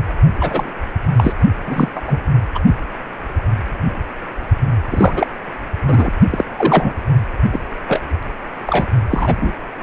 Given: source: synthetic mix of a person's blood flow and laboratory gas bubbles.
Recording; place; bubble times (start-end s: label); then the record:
Doppler ultrasound of blood flow; precordium
0.40-0.70 s: bubbles
1.17-1.33 s: bubbles
1.67-1.89 s: bubbles
1.95-2.01 s: bubbles
2.07-2.19 s: bubbles
2.55-2.60 s: bubbles
4.89-5.27 s: bubbles
5.87-6.13 s: bubbles
6.30-6.44 s: bubbles
6.56-6.93 s: bubbles
7.52-7.59 s: bubbles
7.88-8.02 s: bubbles
8.66-8.88 s: bubbles
9.10-9.36 s: bubbles
9.41-9.52 s: bubbles
From the record:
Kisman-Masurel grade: 233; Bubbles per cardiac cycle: several, 3 to 8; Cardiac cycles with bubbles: 50 to 99%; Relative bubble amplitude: loud (0.450 to 0.775); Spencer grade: 3 (all of the cardiac periods contain showers or single bubble signals, but not dominating or overriding the cardiac motion signals); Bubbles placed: only in the low amplitude regions of the cardiac cycle